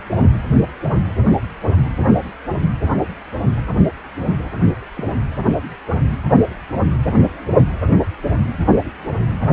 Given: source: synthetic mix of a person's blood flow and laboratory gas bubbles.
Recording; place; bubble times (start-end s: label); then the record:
Doppler ultrasound of blood flow; precordium
4.94-5.04 s: bubbles
From the record:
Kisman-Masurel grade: 111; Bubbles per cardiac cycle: 1 to 2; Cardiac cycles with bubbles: 1 to 10%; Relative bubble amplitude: barely perceptible (0.100 to 0.250); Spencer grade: 1 (occasional bubble signal discernible with the cardiac motion signal, with majority of cardiac periods free of bubbles); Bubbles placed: anywhere in the cardiac cycle